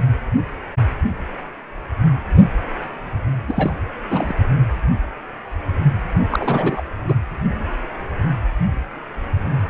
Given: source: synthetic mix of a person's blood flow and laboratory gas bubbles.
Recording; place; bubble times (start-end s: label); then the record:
Doppler ultrasound of blood flow; precordium
3.48-3.77 s: bubbles
4.10-4.34 s: bubbles
6.30-6.83 s: bubbles
7.08-7.14 s: bubbles
From the record:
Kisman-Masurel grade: 222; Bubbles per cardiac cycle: several, 3 to 8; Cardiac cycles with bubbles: 10 to 50%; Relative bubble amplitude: moderate (0.250 to 0.450); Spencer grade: 2 (many but less than half of the cardiac periods contain bubble signals, singularly or in groups); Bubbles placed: anywhere in the cardiac cycle